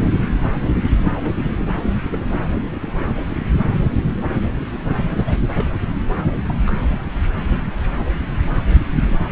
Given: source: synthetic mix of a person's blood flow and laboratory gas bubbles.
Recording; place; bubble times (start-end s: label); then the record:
Doppler ultrasound of blood flow; subclavian vein
1.10-1.54 s: bubbles
1.67-1.71 s: bubbles
2.12-2.18 s: bubbles
5.09-5.40 s: bubbles
5.55-5.65 s: bubbles
6.45-6.72 s: bubbles
9.09-9.19 s: bubbles
From the record:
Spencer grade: 2 (many but less than half of the cardiac periods contain bubble signals, singularly or in groups); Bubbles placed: anywhere in the cardiac cycle